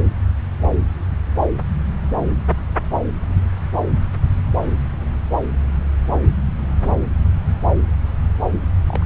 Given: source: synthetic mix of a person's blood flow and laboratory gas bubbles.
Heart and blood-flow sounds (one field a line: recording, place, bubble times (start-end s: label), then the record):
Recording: Doppler ultrasound of blood flow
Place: subclavian vein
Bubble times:
8.88-9.06 s: bubbles
From the record:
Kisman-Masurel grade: 111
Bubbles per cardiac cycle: 1 to 2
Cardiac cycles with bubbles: 1 to 10%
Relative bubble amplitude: barely perceptible (0.100 to 0.250)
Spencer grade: 1 (occasional bubble signal discernible with the cardiac motion signal, with majority of cardiac periods free of bubbles)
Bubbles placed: anywhere in the cardiac cycle